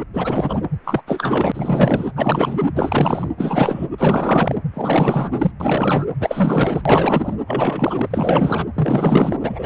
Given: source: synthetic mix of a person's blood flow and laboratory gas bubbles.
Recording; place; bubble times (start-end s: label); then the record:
Doppler ultrasound of blood flow; precordium
0.00-0.03 s: bubbles
0.14-0.62 s: bubbles
0.84-1.02 s: bubbles
1.06-2.11 s: bubbles
2.16-2.59 s: bubbles
2.62-2.71 s: bubbles
2.74-3.29 s: bubbles
3.38-3.88 s: bubbles
3.98-4.56 s: bubbles
4.74-5.52 s: bubbles
5.60-6.06 s: bubbles
6.20-6.82 s: bubbles
6.85-7.33 s: bubbles
7.47-8.66 s: bubbles
8.73-9.36 s: bubbles
9.42-9.66 s: bubbles
From the record:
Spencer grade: 4 (maximum detectable bubble signal sounding continuously throughout systole and diastole of every cardiac period, and overriding the amplitude of the normal cardiac signals); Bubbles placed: anywhere in the cardiac cycle